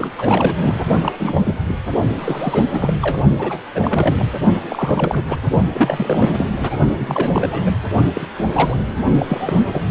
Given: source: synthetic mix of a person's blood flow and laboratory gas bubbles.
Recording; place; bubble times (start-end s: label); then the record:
Doppler ultrasound of blood flow; precordium
0.00-0.11 s: bubbles
0.18-0.80 s: bubbles
1.01-1.12 s: bubbles
1.19-1.41 s: bubbles
1.44-1.55 s: bubbles
1.65-1.79 s: bubbles
2.18-2.93 s: bubbles
3.02-3.19 s: bubbles
3.38-3.59 s: bubbles
3.75-4.29 s: bubbles
4.70-5.23 s: bubbles
5.28-5.39 s: bubbles
5.74-6.51 s: bubbles
6.58-6.77 s: bubbles
6.98-7.72 s: bubbles
8.13-8.27 s: bubbles
8.35-9.05 s: bubbles
9.18-9.67 s: bubbles
9.72-9.81 s: bubbles
From the record:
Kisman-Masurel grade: 342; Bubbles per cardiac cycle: rolling drumbeat, 9 or more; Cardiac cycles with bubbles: 100%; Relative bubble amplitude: moderate (0.250 to 0.450); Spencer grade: 3 (all of the cardiac periods contain showers or single bubble signals, but not dominating or overriding the cardiac motion signals); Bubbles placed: only in the low amplitude regions of the cardiac cycle